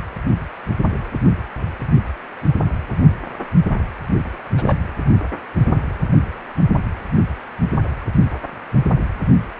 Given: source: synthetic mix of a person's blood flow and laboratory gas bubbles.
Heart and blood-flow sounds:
Doppler ultrasound of blood flow; precordium
4.56-4.75 s: bubbles
From the record:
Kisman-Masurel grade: 221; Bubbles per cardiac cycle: several, 3 to 8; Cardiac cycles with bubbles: 10 to 50%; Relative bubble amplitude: barely perceptible (0.100 to 0.250); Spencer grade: 2 (many but less than half of the cardiac periods contain bubble signals, singularly or in groups); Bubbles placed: only in the low amplitude regions of the cardiac cycle

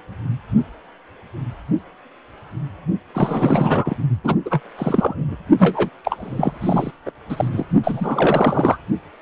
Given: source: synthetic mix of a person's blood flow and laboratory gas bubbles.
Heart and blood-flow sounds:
Doppler ultrasound of blood flow; precordium
3.14-3.96 s: bubbles
4.24-4.35 s: bubbles
4.45-4.60 s: bubbles
4.77-5.37 s: bubbles
5.58-5.90 s: bubbles
6.04-6.92 s: bubbles
7.05-7.11 s: bubbles
7.29-7.48 s: bubbles
7.51-7.66 s: bubbles
7.83-8.78 s: bubbles
From the record:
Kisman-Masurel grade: 333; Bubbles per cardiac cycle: rolling drumbeat, 9 or more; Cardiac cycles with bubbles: 50 to 99%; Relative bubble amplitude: loud (0.450 to 0.775); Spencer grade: 3 (all of the cardiac periods contain showers or single bubble signals, but not dominating or overriding the cardiac motion signals); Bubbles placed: only in the low amplitude regions of the cardiac cycle

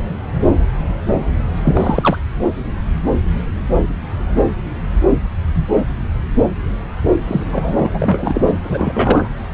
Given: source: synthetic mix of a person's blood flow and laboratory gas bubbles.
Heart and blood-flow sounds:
Doppler ultrasound of blood flow; subclavian vein
1.64-2.17 s: bubbles
7.27-7.43 s: bubbles
7.52-7.90 s: bubbles
7.94-8.43 s: bubbles
8.46-8.51 s: bubbles
8.64-9.29 s: bubbles
From the record:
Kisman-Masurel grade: 223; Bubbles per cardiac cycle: several, 3 to 8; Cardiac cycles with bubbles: 10 to 50%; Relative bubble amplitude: loud (0.450 to 0.775); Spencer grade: 2 (many but less than half of the cardiac periods contain bubble signals, singularly or in groups); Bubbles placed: anywhere in the cardiac cycle

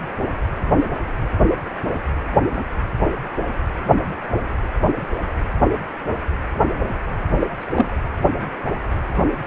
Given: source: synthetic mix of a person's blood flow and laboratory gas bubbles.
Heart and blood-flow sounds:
Doppler ultrasound of blood flow; precordium
7.39-7.47 s: bubbles
7.57-7.93 s: bubbles
From the record:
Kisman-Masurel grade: 113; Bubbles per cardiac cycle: 1 to 2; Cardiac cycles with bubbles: 1 to 10%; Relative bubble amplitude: loud (0.450 to 0.775); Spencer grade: 1 (occasional bubble signal discernible with the cardiac motion signal, with majority of cardiac periods free of bubbles); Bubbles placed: anywhere in the cardiac cycle

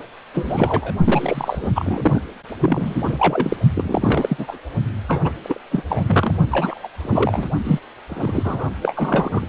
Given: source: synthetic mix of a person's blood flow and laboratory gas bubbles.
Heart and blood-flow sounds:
Doppler ultrasound of blood flow; precordium
0.34-0.94 s: bubbles
1.04-1.69 s: bubbles
1.75-2.22 s: bubbles
2.61-3.56 s: bubbles
3.75-4.58 s: bubbles
5.08-5.33 s: bubbles
5.44-5.58 s: bubbles
5.71-5.83 s: bubbles
5.88-6.35 s: bubbles
6.51-6.88 s: bubbles
7.02-7.50 s: bubbles
7.64-7.80 s: bubbles
8.09-8.70 s: bubbles
8.82-9.47 s: bubbles
From the record:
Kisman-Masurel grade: 332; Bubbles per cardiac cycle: rolling drumbeat, 9 or more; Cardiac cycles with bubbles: 50 to 99%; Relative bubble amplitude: moderate (0.250 to 0.450); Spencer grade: 3 (all of the cardiac periods contain showers or single bubble signals, but not dominating or overriding the cardiac motion signals); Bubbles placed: only in the low amplitude regions of the cardiac cycle

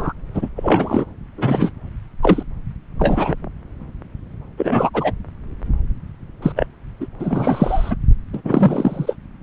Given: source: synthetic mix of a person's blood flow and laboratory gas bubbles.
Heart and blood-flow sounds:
Doppler ultrasound of blood flow; subclavian vein
0.00-0.12 s: bubbles
0.34-0.49 s: bubbles
0.56-1.05 s: bubbles
1.37-1.71 s: bubbles
2.22-2.43 s: bubbles
2.98-3.35 s: bubbles
4.58-4.90 s: bubbles
4.94-5.12 s: bubbles
6.42-6.53 s: bubbles
6.56-6.67 s: bubbles
7.00-7.07 s: bubbles
7.19-7.96 s: bubbles
8.33-8.42 s: bubbles
8.44-9.16 s: bubbles
From the record:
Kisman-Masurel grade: 233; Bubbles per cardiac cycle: several, 3 to 8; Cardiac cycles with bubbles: 50 to 99%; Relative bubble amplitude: loud (0.450 to 0.775); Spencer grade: 3 (all of the cardiac periods contain showers or single bubble signals, but not dominating or overriding the cardiac motion signals); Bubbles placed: anywhere in the cardiac cycle

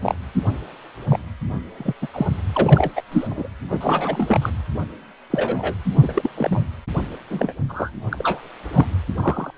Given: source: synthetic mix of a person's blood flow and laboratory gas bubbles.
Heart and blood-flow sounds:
Doppler ultrasound of blood flow; precordium
0.02-0.15 s: bubbles
1.09-1.19 s: bubbles
1.78-1.93 s: bubbles
2.02-2.08 s: bubbles
2.13-2.27 s: bubbles
2.54-2.90 s: bubbles
2.96-3.02 s: bubbles
3.12-3.27 s: bubbles
3.29-3.48 s: bubbles
3.69-4.50 s: bubbles
5.30-5.74 s: bubbles
5.91-6.29 s: bubbles
6.37-6.61 s: bubbles
7.29-7.54 s: bubbles
7.68-7.90 s: bubbles
8.11-8.47 s: bubbles
8.72-8.86 s: bubbles
9.16-9.51 s: bubbles
From the record:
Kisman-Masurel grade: 242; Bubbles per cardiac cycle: several, 3 to 8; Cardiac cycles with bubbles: 100%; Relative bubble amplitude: moderate (0.250 to 0.450); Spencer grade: 3 (all of the cardiac periods contain showers or single bubble signals, but not dominating or overriding the cardiac motion signals); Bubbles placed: anywhere in the cardiac cycle

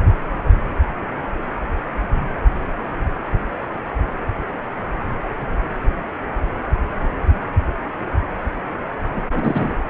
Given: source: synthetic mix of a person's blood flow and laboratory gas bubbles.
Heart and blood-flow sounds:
Doppler ultrasound of blood flow; precordium
9.16-9.24 s: bubbles
9.32-9.75 s: bubbles
From the record:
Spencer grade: 1 (occasional bubble signal discernible with the cardiac motion signal, with majority of cardiac periods free of bubbles); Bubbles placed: anywhere in the cardiac cycle

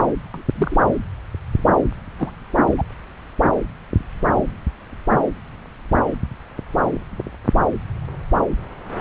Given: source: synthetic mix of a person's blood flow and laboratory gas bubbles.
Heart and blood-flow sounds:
Doppler ultrasound of blood flow; subclavian vein
0.00-0.05 s: bubbles
0.34-0.42 s: bubbles
0.55-0.77 s: bubbles
2.18-2.30 s: bubbles
2.78-2.84 s: bubbles
From the record:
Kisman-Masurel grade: 123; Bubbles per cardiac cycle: 1 to 2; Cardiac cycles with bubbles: 10 to 50%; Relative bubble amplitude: loud (0.450 to 0.775); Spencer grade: 2 (many but less than half of the cardiac periods contain bubble signals, singularly or in groups); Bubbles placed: anywhere in the cardiac cycle

